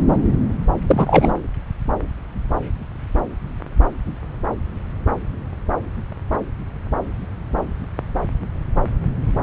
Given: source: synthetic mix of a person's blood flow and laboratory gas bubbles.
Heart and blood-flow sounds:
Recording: Doppler ultrasound of blood flow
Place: subclavian vein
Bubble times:
0.88-1.33 s: bubbles
From the record:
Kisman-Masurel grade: 213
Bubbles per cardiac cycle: several, 3 to 8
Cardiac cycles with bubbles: 1 to 10%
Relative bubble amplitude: loud (0.450 to 0.775)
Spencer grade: 1 (occasional bubble signal discernible with the cardiac motion signal, with majority of cardiac periods free of bubbles)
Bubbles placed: anywhere in the cardiac cycle

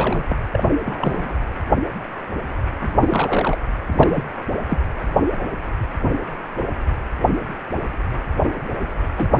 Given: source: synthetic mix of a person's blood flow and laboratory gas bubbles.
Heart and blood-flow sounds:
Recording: Doppler ultrasound of blood flow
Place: precordium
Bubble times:
0.00-0.24 s: bubbles
0.29-0.37 s: bubbles
0.53-0.75 s: bubbles
0.85-1.35 s: bubbles
2.80-3.58 s: bubbles
3.93-4.25 s: bubbles
4.68-4.79 s: bubbles
9.17-9.32 s: bubbles
9.35-9.40 s: bubbles
From the record:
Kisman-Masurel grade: 232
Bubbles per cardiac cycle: several, 3 to 8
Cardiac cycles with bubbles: 50 to 99%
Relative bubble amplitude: moderate (0.250 to 0.450)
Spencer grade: 3 (all of the cardiac periods contain showers or single bubble signals, but not dominating or overriding the cardiac motion signals)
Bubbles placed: anywhere in the cardiac cycle

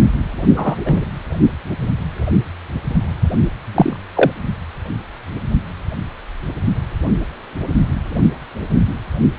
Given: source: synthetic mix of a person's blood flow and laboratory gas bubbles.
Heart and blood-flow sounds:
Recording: Doppler ultrasound of blood flow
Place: precordium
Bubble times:
0.56-0.76 s: bubbles
0.85-1.05 s: bubbles
3.75-3.96 s: bubbles
4.15-4.31 s: bubbles
From the record:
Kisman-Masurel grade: 123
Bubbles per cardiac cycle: 1 to 2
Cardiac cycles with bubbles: 10 to 50%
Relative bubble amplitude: loud (0.450 to 0.775)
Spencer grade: 2 (many but less than half of the cardiac periods contain bubble signals, singularly or in groups)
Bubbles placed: anywhere in the cardiac cycle

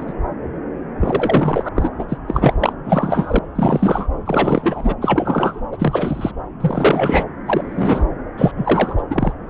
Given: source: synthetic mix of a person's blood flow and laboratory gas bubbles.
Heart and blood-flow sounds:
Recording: Doppler ultrasound of blood flow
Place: subclavian vein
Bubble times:
0.00-0.12 s: bubbles
0.99-1.69 s: bubbles
1.75-1.89 s: bubbles
1.98-2.04 s: bubbles
2.08-2.17 s: bubbles
2.27-2.53 s: bubbles
2.59-2.73 s: bubbles
2.84-3.39 s: bubbles
3.55-4.07 s: bubbles
4.25-4.95 s: bubbles
5.01-5.60 s: bubbles
5.72-6.31 s: bubbles
6.60-7.24 s: bubbles
7.46-8.08 s: bubbles
8.37-8.52 s: bubbles
8.57-9.03 s: bubbles
9.10-9.33 s: bubbles
From the record:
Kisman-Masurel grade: 343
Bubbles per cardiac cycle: rolling drumbeat, 9 or more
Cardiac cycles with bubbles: 100%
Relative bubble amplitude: loud (0.450 to 0.775)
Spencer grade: 3 (all of the cardiac periods contain showers or single bubble signals, but not dominating or overriding the cardiac motion signals)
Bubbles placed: anywhere in the cardiac cycle

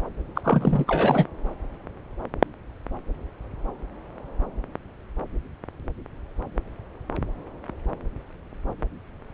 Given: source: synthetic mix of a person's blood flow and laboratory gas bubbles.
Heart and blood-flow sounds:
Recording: Doppler ultrasound of blood flow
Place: subclavian vein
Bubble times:
0.35-0.41 s: bubbles
0.44-0.85 s: bubbles
0.88-1.26 s: bubbles
From the record:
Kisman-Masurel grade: 222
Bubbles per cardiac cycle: several, 3 to 8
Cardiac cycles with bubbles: 10 to 50%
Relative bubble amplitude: moderate (0.250 to 0.450)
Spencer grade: 2 (many but less than half of the cardiac periods contain bubble signals, singularly or in groups)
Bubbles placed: anywhere in the cardiac cycle

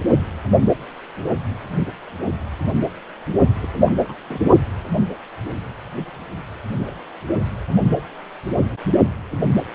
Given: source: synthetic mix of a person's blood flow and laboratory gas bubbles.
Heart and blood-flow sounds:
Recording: Doppler ultrasound of blood flow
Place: precordium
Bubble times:
3.56-3.67 s: bubbles
3.77-3.96 s: bubbles
4.04-4.14 s: bubbles
4.26-4.39 s: bubbles
From the record:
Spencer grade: 2 (many but less than half of the cardiac periods contain bubble signals, singularly or in groups)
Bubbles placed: only in the low amplitude regions of the cardiac cycle

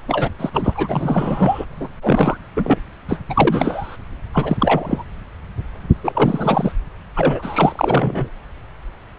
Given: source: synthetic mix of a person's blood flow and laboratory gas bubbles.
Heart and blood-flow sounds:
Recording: Doppler ultrasound of blood flow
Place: subclavian vein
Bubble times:
0.08-0.30 s: bubbles
0.39-0.49 s: bubbles
0.53-1.65 s: bubbles
1.80-1.88 s: bubbles
2.01-2.38 s: bubbles
2.56-2.78 s: bubbles
3.08-3.19 s: bubbles
3.29-3.96 s: bubbles
4.33-5.03 s: bubbles
6.04-6.72 s: bubbles
7.16-8.29 s: bubbles
From the record:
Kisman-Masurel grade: 332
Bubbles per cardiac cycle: rolling drumbeat, 9 or more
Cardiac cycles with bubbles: 50 to 99%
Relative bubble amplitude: moderate (0.250 to 0.450)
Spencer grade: 3 (all of the cardiac periods contain showers or single bubble signals, but not dominating or overriding the cardiac motion signals)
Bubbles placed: anywhere in the cardiac cycle

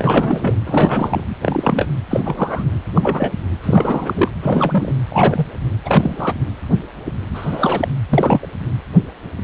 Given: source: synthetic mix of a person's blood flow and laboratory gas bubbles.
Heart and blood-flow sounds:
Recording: Doppler ultrasound of blood flow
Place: precordium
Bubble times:
0.00-0.57 s: bubbles
0.66-1.24 s: bubbles
1.41-1.88 s: bubbles
2.10-2.65 s: bubbles
2.86-3.32 s: bubbles
3.64-4.29 s: bubbles
4.42-4.94 s: bubbles
5.08-5.47 s: bubbles
5.84-6.33 s: bubbles
7.34-7.88 s: bubbles
8.09-8.49 s: bubbles
From the record:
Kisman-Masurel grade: 233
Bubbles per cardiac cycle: several, 3 to 8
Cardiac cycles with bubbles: 50 to 99%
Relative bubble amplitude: loud (0.450 to 0.775)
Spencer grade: 3 (all of the cardiac periods contain showers or single bubble signals, but not dominating or overriding the cardiac motion signals)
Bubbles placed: anywhere in the cardiac cycle

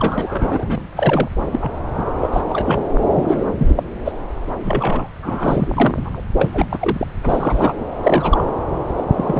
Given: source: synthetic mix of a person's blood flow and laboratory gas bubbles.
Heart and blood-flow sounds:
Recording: Doppler ultrasound of blood flow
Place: subclavian vein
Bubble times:
0.00-0.84 s: bubbles
0.96-1.29 s: bubbles
1.51-1.71 s: bubbles
1.97-2.04 s: bubbles
2.20-2.29 s: bubbles
2.32-2.41 s: bubbles
2.49-2.84 s: bubbles
3.13-3.51 s: bubbles
3.58-3.83 s: bubbles
4.04-4.12 s: bubbles
4.60-5.08 s: bubbles
5.21-5.68 s: bubbles
5.76-6.21 s: bubbles
6.38-6.51 s: bubbles
6.54-6.66 s: bubbles
6.71-7.07 s: bubbles
7.22-7.73 s: bubbles
8.03-8.45 s: bubbles
8.97-9.04 s: bubbles
9.14-9.39 s: bubbles
From the record:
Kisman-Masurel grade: 242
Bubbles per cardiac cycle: several, 3 to 8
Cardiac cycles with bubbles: 100%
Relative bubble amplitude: moderate (0.250 to 0.450)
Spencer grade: 3 (all of the cardiac periods contain showers or single bubble signals, but not dominating or overriding the cardiac motion signals)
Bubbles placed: anywhere in the cardiac cycle

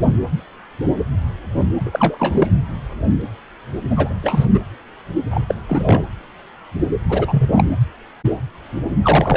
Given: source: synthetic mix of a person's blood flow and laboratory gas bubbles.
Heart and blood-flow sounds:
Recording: Doppler ultrasound of blood flow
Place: precordium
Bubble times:
1.80-2.48 s: bubbles
3.90-4.13 s: bubbles
4.22-4.46 s: bubbles
4.53-4.60 s: bubbles
5.30-5.55 s: bubbles
5.68-6.03 s: bubbles
7.09-7.63 s: bubbles
9.03-9.36 s: bubbles
From the record:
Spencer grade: 2 (many but less than half of the cardiac periods contain bubble signals, singularly or in groups)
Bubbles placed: anywhere in the cardiac cycle

